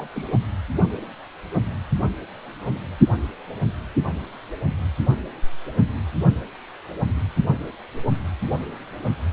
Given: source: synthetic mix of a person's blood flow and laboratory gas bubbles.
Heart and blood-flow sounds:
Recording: Doppler ultrasound of blood flow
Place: precordium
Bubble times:
0.00-0.07 s: bubbles
0.14-0.27 s: bubbles
From the record:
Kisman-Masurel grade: 211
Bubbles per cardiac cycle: several, 3 to 8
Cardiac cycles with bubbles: 1 to 10%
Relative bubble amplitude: barely perceptible (0.100 to 0.250)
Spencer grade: 1 (occasional bubble signal discernible with the cardiac motion signal, with majority of cardiac periods free of bubbles)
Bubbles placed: anywhere in the cardiac cycle

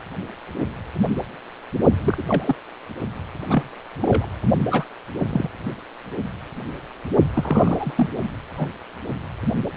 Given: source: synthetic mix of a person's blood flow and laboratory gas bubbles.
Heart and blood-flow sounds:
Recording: Doppler ultrasound of blood flow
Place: precordium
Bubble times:
2.02-2.24 s: bubbles
2.27-2.56 s: bubbles
3.49-3.63 s: bubbles
4.02-4.27 s: bubbles
4.71-4.85 s: bubbles
5.18-5.50 s: bubbles
7.34-8.09 s: bubbles
8.57-8.68 s: bubbles
From the record:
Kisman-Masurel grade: 222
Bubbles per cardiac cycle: several, 3 to 8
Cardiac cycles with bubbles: 10 to 50%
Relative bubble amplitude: moderate (0.250 to 0.450)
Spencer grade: 2 (many but less than half of the cardiac periods contain bubble signals, singularly or in groups)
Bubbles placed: only in the low amplitude regions of the cardiac cycle

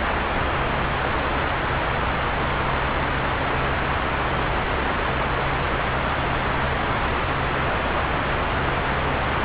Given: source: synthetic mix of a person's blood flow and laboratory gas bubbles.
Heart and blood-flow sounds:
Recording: Doppler ultrasound of blood flow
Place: subclavian vein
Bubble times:
no bubbles
From the record:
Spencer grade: 0 (complete lack of bubble signals)

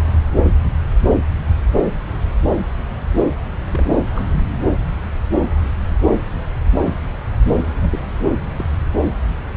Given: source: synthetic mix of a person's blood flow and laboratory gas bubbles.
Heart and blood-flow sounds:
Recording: Doppler ultrasound of blood flow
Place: subclavian vein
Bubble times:
3.71-3.95 s: bubbles
4.15-4.23 s: bubbles
7.82-8.00 s: bubbles
8.58-8.63 s: bubbles
From the record:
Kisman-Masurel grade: 121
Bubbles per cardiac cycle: 1 to 2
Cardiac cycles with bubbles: 10 to 50%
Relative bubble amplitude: barely perceptible (0.100 to 0.250)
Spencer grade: 2 (many but less than half of the cardiac periods contain bubble signals, singularly or in groups)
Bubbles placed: anywhere in the cardiac cycle

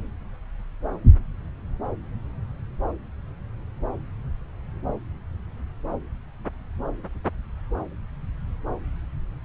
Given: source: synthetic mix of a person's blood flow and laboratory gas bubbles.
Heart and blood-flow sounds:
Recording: Doppler ultrasound of blood flow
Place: subclavian vein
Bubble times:
no bubbles
From the record:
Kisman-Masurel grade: 000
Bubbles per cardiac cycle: 0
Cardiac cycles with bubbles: 0%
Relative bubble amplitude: no bubbles discernible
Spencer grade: 0 (complete lack of bubble signals)

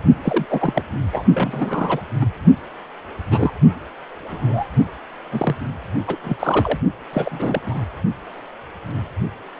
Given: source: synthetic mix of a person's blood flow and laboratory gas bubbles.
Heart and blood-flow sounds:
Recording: Doppler ultrasound of blood flow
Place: precordium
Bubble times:
0.23-0.46 s: bubbles
0.49-0.82 s: bubbles
1.12-1.25 s: bubbles
1.33-2.00 s: bubbles
2.21-2.25 s: bubbles
3.29-3.52 s: bubbles
4.27-4.67 s: bubbles
5.31-5.55 s: bubbles
6.07-6.17 s: bubbles
6.23-6.78 s: bubbles
7.13-7.59 s: bubbles
7.63-7.84 s: bubbles
From the record:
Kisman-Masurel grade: 232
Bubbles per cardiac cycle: several, 3 to 8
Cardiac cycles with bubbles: 50 to 99%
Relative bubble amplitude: moderate (0.250 to 0.450)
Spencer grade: 3 (all of the cardiac periods contain showers or single bubble signals, but not dominating or overriding the cardiac motion signals)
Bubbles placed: only in the low amplitude regions of the cardiac cycle

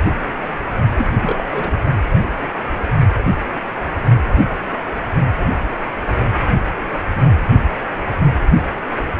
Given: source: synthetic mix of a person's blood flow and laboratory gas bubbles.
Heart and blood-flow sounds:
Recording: Doppler ultrasound of blood flow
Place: precordium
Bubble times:
0.94-1.07 s: bubbles
1.22-1.44 s: bubbles
1.51-1.72 s: bubbles
From the record:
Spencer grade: 1 (occasional bubble signal discernible with the cardiac motion signal, with majority of cardiac periods free of bubbles)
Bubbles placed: only in the low amplitude regions of the cardiac cycle

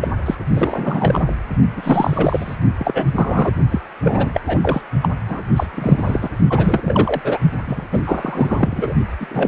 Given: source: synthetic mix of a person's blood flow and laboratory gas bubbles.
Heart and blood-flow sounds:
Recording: Doppler ultrasound of blood flow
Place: precordium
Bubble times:
0.01-0.08 s: bubbles
0.25-0.35 s: bubbles
0.56-1.33 s: bubbles
1.77-2.55 s: bubbles
2.78-3.09 s: bubbles
3.15-3.54 s: bubbles
3.71-3.81 s: bubbles
4.03-4.30 s: bubbles
4.34-4.41 s: bubbles
4.46-4.81 s: bubbles
5.02-5.08 s: bubbles
5.29-5.42 s: bubbles
5.56-5.67 s: bubbles
5.72-6.30 s: bubbles
6.49-7.21 s: bubbles
7.24-7.39 s: bubbles
7.67-7.87 s: bubbles
7.92-8.02 s: bubbles
8.06-8.94 s: bubbles
9.20-9.27 s: bubbles
9.30-9.48 s: bubbles
From the record:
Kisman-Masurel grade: 333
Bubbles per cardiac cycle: rolling drumbeat, 9 or more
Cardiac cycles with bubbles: 50 to 99%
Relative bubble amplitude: loud (0.450 to 0.775)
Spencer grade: 3 (all of the cardiac periods contain showers or single bubble signals, but not dominating or overriding the cardiac motion signals)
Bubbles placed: only in the low amplitude regions of the cardiac cycle

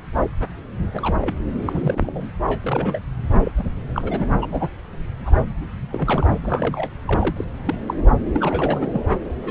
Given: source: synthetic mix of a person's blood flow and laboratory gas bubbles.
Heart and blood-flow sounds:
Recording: Doppler ultrasound of blood flow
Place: subclavian vein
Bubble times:
0.20-0.26 s: bubbles
0.93-1.17 s: bubbles
1.20-1.35 s: bubbles
1.66-2.27 s: bubbles
2.46-2.99 s: bubbles
3.44-3.52 s: bubbles
3.57-3.64 s: bubbles
3.94-4.27 s: bubbles
4.41-4.47 s: bubbles
4.51-4.68 s: bubbles
5.25-5.33 s: bubbles
5.91-6.26 s: bubbles
6.42-6.89 s: bubbles
7.05-7.45 s: bubbles
7.65-7.75 s: bubbles
7.88-7.94 s: bubbles
8.33-9.02 s: bubbles
9.43-9.51 s: bubbles
From the record:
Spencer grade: 3 (all of the cardiac periods contain showers or single bubble signals, but not dominating or overriding the cardiac motion signals)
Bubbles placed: anywhere in the cardiac cycle

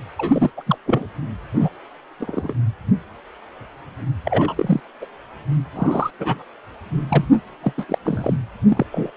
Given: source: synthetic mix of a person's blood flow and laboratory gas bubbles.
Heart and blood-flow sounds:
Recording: Doppler ultrasound of blood flow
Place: precordium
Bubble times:
0.19-0.51 s: bubbles
0.57-0.63 s: bubbles
0.66-0.78 s: bubbles
0.86-1.06 s: bubbles
1.54-1.69 s: bubbles
2.20-2.54 s: bubbles
4.25-4.80 s: bubbles
5.01-5.05 s: bubbles
5.75-6.10 s: bubbles
6.19-6.42 s: bubbles
7.08-7.25 s: bubbles
7.62-7.73 s: bubbles
7.77-7.84 s: bubbles
7.88-7.98 s: bubbles
8.04-8.38 s: bubbles
8.69-8.86 s: bubbles
8.92-9.12 s: bubbles
From the record:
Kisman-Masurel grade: 232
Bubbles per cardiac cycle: several, 3 to 8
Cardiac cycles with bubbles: 50 to 99%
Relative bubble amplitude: moderate (0.250 to 0.450)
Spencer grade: 3 (all of the cardiac periods contain showers or single bubble signals, but not dominating or overriding the cardiac motion signals)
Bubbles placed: anywhere in the cardiac cycle

